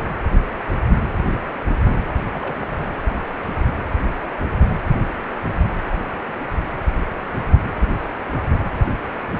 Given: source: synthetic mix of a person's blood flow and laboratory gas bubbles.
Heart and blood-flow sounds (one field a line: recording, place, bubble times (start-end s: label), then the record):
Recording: Doppler ultrasound of blood flow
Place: precordium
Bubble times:
2.04-2.21 s: bubbles
2.33-2.56 s: bubbles
2.61-2.67 s: bubbles
From the record:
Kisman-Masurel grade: 211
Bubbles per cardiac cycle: several, 3 to 8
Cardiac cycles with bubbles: 1 to 10%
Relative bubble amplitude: barely perceptible (0.100 to 0.250)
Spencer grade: 1 (occasional bubble signal discernible with the cardiac motion signal, with majority of cardiac periods free of bubbles)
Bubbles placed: anywhere in the cardiac cycle